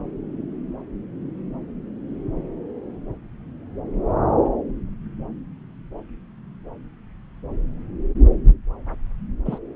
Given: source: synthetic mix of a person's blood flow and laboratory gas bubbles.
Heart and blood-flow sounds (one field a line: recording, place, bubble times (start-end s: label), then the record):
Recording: Doppler ultrasound of blood flow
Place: subclavian vein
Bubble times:
9.46-9.59 s: bubbles
From the record:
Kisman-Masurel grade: 212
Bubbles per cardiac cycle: several, 3 to 8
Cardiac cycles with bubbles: 1 to 10%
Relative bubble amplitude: moderate (0.250 to 0.450)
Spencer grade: 1 (occasional bubble signal discernible with the cardiac motion signal, with majority of cardiac periods free of bubbles)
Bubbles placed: anywhere in the cardiac cycle